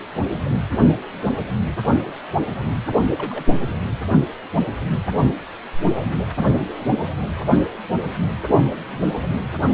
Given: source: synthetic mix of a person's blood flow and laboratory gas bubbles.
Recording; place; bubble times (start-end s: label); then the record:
Doppler ultrasound of blood flow; precordium
3.17-3.45 s: bubbles
From the record:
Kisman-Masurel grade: 112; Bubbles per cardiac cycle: 1 to 2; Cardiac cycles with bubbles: 1 to 10%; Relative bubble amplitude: moderate (0.250 to 0.450); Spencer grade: 1 (occasional bubble signal discernible with the cardiac motion signal, with majority of cardiac periods free of bubbles); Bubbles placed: only in the low amplitude regions of the cardiac cycle